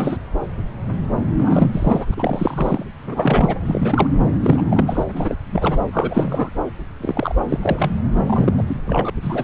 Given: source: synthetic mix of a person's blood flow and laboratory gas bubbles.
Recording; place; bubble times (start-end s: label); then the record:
Doppler ultrasound of blood flow; subclavian vein
0.00-0.17 s: bubbles
1.38-2.85 s: bubbles
2.98-3.59 s: bubbles
3.65-4.21 s: bubbles
4.42-5.04 s: bubbles
5.13-5.36 s: bubbles
5.52-5.78 s: bubbles
5.92-6.51 s: bubbles
7.00-7.35 s: bubbles
7.49-7.92 s: bubbles
8.13-8.24 s: bubbles
8.26-8.53 s: bubbles
8.57-8.63 s: bubbles
8.67-8.76 s: bubbles
8.87-9.10 s: bubbles
9.22-9.44 s: bubbles
From the record:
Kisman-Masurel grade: 332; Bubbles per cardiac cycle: rolling drumbeat, 9 or more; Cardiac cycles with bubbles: 50 to 99%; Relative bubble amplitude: moderate (0.250 to 0.450); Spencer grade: 3 (all of the cardiac periods contain showers or single bubble signals, but not dominating or overriding the cardiac motion signals); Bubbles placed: anywhere in the cardiac cycle